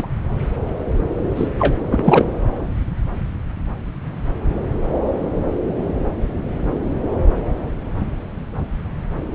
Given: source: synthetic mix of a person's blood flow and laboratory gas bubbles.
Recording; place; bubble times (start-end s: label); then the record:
Doppler ultrasound of blood flow; subclavian vein
0.00-0.07 s: bubbles
1.35-1.49 s: bubbles
1.59-1.76 s: bubbles
1.91-2.26 s: bubbles
From the record:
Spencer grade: 2 (many but less than half of the cardiac periods contain bubble signals, singularly or in groups); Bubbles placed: anywhere in the cardiac cycle